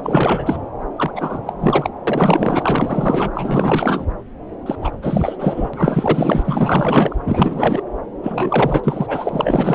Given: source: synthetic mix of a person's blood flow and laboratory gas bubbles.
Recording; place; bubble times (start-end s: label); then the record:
Doppler ultrasound of blood flow; subclavian vein
0.03-0.56 s: bubbles
0.96-1.11 s: bubbles
1.15-1.55 s: bubbles
1.59-1.90 s: bubbles
2.07-3.31 s: bubbles
3.34-4.04 s: bubbles
4.66-4.75 s: bubbles
4.82-4.91 s: bubbles
5.02-5.36 s: bubbles
5.38-5.70 s: bubbles
5.73-7.16 s: bubbles
7.26-7.82 s: bubbles
8.23-9.75 s: bubbles
From the record:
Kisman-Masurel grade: 444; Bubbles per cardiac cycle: continuous sound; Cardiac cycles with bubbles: 100%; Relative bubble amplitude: maximal (0.775 to 0.999); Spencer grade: 4 (maximum detectable bubble signal sounding continuously throughout systole and diastole of every cardiac period, and overriding the amplitude of the normal cardiac signals); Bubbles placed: anywhere in the cardiac cycle